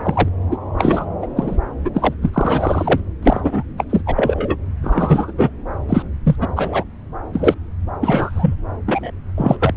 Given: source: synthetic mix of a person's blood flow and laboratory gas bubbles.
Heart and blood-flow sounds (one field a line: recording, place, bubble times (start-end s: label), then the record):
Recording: Doppler ultrasound of blood flow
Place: subclavian vein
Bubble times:
0.03-0.29 s: bubbles
0.51-0.56 s: bubbles
0.78-1.10 s: bubbles
1.22-1.26 s: bubbles
1.35-1.57 s: bubbles
1.84-1.91 s: bubbles
1.94-2.15 s: bubbles
2.22-2.30 s: bubbles
2.33-3.00 s: bubbles
3.23-3.41 s: bubbles
3.43-3.62 s: bubbles
3.78-3.85 s: bubbles
3.90-4.01 s: bubbles
4.05-4.56 s: bubbles
4.82-5.31 s: bubbles
5.38-5.50 s: bubbles
5.88-6.04 s: bubbles
6.26-6.35 s: bubbles
6.41-6.48 s: bubbles
6.55-6.84 s: bubbles
7.33-7.54 s: bubbles
8.01-8.54 s: bubbles
8.86-9.11 s: bubbles
9.37-9.57 s: bubbles
9.60-9.74 s: bubbles
From the record:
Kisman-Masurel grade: 343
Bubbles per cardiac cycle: rolling drumbeat, 9 or more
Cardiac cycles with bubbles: 100%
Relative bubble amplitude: loud (0.450 to 0.775)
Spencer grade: 3 (all of the cardiac periods contain showers or single bubble signals, but not dominating or overriding the cardiac motion signals)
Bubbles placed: anywhere in the cardiac cycle